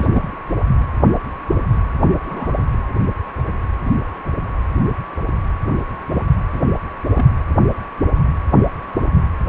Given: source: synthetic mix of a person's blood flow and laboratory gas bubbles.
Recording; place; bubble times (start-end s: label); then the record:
Doppler ultrasound of blood flow; precordium
0.00-0.08 s: bubbles
0.12-0.40 s: bubbles
2.02-2.07 s: bubbles
2.26-2.52 s: bubbles
6.07-6.24 s: bubbles
6.54-6.67 s: bubbles
6.98-7.12 s: bubbles
7.15-7.33 s: bubbles
From the record:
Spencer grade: 2 (many but less than half of the cardiac periods contain bubble signals, singularly or in groups); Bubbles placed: anywhere in the cardiac cycle